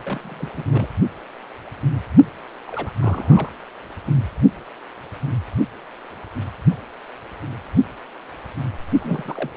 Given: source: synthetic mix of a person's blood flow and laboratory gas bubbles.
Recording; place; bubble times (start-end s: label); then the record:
Doppler ultrasound of blood flow; precordium
0.04-0.66 s: bubbles
0.71-0.89 s: bubbles
2.67-2.91 s: bubbles
3.00-3.50 s: bubbles
4.07-4.12 s: bubbles
8.99-9.51 s: bubbles
From the record:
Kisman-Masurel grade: 221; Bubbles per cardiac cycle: several, 3 to 8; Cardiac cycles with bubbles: 10 to 50%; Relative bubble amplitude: barely perceptible (0.100 to 0.250); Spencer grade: 2 (many but less than half of the cardiac periods contain bubble signals, singularly or in groups); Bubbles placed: only in the low amplitude regions of the cardiac cycle